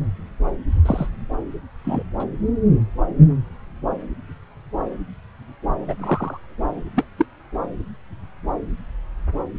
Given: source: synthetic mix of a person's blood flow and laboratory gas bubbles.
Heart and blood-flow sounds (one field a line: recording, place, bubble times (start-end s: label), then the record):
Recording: Doppler ultrasound of blood flow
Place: subclavian vein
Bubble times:
0.85-1.09 s: bubbles
1.84-2.03 s: bubbles
2.20-2.23 s: bubbles
5.88-5.96 s: bubbles
5.98-6.40 s: bubbles
6.96-7.05 s: bubbles
7.18-7.25 s: bubbles
From the record:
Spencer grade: 2 (many but less than half of the cardiac periods contain bubble signals, singularly or in groups)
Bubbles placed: anywhere in the cardiac cycle